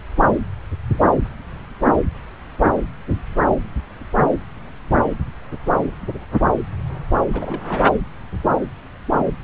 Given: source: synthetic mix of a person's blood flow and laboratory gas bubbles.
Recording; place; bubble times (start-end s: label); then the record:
Doppler ultrasound of blood flow; subclavian vein
7.33-7.86 s: bubbles
From the record:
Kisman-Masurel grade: 211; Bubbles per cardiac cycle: several, 3 to 8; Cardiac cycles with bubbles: 1 to 10%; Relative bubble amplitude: barely perceptible (0.100 to 0.250); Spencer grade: 1 (occasional bubble signal discernible with the cardiac motion signal, with majority of cardiac periods free of bubbles); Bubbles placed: anywhere in the cardiac cycle